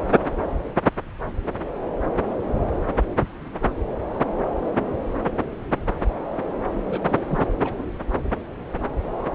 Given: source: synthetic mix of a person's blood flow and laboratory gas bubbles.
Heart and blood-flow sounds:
Doppler ultrasound of blood flow; subclavian vein
6.90-6.98 s: bubbles
7.04-7.47 s: bubbles
7.63-7.74 s: bubbles
From the record:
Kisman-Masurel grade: 211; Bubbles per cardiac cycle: several, 3 to 8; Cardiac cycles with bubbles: 1 to 10%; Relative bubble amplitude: barely perceptible (0.100 to 0.250); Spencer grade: 1 (occasional bubble signal discernible with the cardiac motion signal, with majority of cardiac periods free of bubbles); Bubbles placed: anywhere in the cardiac cycle

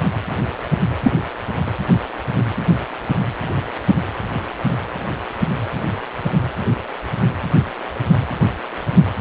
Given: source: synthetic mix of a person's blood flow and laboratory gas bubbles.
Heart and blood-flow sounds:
Doppler ultrasound of blood flow; precordium
1.04-1.14 s: bubbles
From the record:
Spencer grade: 1 (occasional bubble signal discernible with the cardiac motion signal, with majority of cardiac periods free of bubbles); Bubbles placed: anywhere in the cardiac cycle

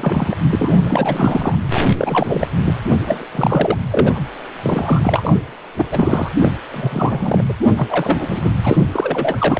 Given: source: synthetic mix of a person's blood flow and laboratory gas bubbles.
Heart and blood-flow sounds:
Doppler ultrasound of blood flow; precordium
0.00-0.36 s: bubbles
0.50-1.55 s: bubbles
1.74-1.81 s: bubbles
1.98-2.48 s: bubbles
2.60-2.74 s: bubbles
3.06-3.25 s: bubbles
3.32-3.77 s: bubbles
3.89-4.20 s: bubbles
4.62-5.41 s: bubbles
5.77-5.87 s: bubbles
5.91-6.29 s: bubbles
6.36-6.53 s: bubbles
6.71-7.42 s: bubbles
7.49-7.54 s: bubbles
7.68-7.74 s: bubbles
7.77-8.50 s: bubbles
8.63-8.77 s: bubbles
8.91-9.60 s: bubbles
From the record:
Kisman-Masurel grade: 343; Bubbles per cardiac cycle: rolling drumbeat, 9 or more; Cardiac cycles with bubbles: 100%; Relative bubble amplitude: loud (0.450 to 0.775); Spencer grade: 3 (all of the cardiac periods contain showers or single bubble signals, but not dominating or overriding the cardiac motion signals); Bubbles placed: anywhere in the cardiac cycle

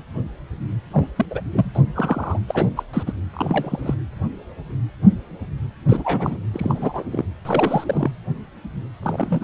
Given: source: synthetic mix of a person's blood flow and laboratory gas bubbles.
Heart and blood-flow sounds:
Doppler ultrasound of blood flow; precordium
0.92-1.07 s: bubbles
1.16-1.25 s: bubbles
1.30-1.41 s: bubbles
1.52-1.72 s: bubbles
1.74-1.81 s: bubbles
1.94-2.40 s: bubbles
2.48-2.69 s: bubbles
2.77-2.83 s: bubbles
2.93-3.03 s: bubbles
3.06-3.12 s: bubbles
3.33-3.94 s: bubbles
5.88-6.38 s: bubbles
6.53-7.04 s: bubbles
7.10-7.25 s: bubbles
7.45-8.11 s: bubbles
9.03-9.44 s: bubbles
From the record:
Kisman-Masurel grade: 232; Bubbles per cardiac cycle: several, 3 to 8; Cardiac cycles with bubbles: 50 to 99%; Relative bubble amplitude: moderate (0.250 to 0.450); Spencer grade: 3 (all of the cardiac periods contain showers or single bubble signals, but not dominating or overriding the cardiac motion signals); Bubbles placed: anywhere in the cardiac cycle

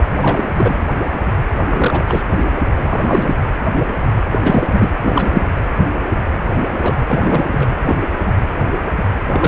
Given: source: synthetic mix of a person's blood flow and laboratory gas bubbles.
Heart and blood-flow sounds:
Doppler ultrasound of blood flow; precordium
0.19-0.44 s: bubbles
0.54-0.80 s: bubbles
1.70-2.23 s: bubbles
2.90-3.35 s: bubbles
4.31-4.93 s: bubbles
5.02-5.43 s: bubbles
6.81-6.96 s: bubbles
7.06-7.75 s: bubbles
7.85-8.01 s: bubbles
9.28-9.48 s: bubbles
From the record:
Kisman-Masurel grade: 233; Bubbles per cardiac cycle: several, 3 to 8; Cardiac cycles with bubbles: 50 to 99%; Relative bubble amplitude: loud (0.450 to 0.775); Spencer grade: 3 (all of the cardiac periods contain showers or single bubble signals, but not dominating or overriding the cardiac motion signals); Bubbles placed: anywhere in the cardiac cycle

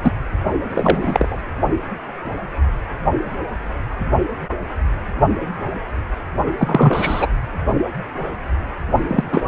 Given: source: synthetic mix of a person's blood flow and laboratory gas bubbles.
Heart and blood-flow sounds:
Doppler ultrasound of blood flow; precordium
0.03-0.11 s: bubbles
0.68-1.42 s: bubbles
6.58-7.28 s: bubbles
9.07-9.23 s: bubbles
9.32-9.48 s: bubbles
From the record:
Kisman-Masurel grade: 233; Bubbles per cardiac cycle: several, 3 to 8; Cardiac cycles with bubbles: 50 to 99%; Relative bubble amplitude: loud (0.450 to 0.775); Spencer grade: 3 (all of the cardiac periods contain showers or single bubble signals, but not dominating or overriding the cardiac motion signals); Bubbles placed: only in the low amplitude regions of the cardiac cycle

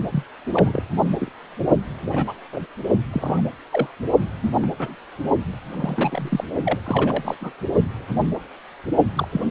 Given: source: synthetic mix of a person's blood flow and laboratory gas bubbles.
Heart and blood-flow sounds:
Doppler ultrasound of blood flow; precordium
0.12-0.23 s: bubbles
0.52-0.83 s: bubbles
1.09-1.16 s: bubbles
1.19-1.31 s: bubbles
2.06-2.33 s: bubbles
2.52-2.60 s: bubbles
3.12-3.43 s: bubbles
3.71-3.87 s: bubbles
4.42-4.53 s: bubbles
4.62-4.70 s: bubbles
4.79-4.95 s: bubbles
5.75-6.44 s: bubbles
6.66-6.79 s: bubbles
6.84-7.37 s: bubbles
7.40-7.51 s: bubbles
9.15-9.28 s: bubbles
9.32-9.41 s: bubbles
From the record:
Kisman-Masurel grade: 232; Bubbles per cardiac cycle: several, 3 to 8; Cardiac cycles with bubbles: 50 to 99%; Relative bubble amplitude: moderate (0.250 to 0.450); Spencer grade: 3 (all of the cardiac periods contain showers or single bubble signals, but not dominating or overriding the cardiac motion signals); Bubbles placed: only in the low amplitude regions of the cardiac cycle

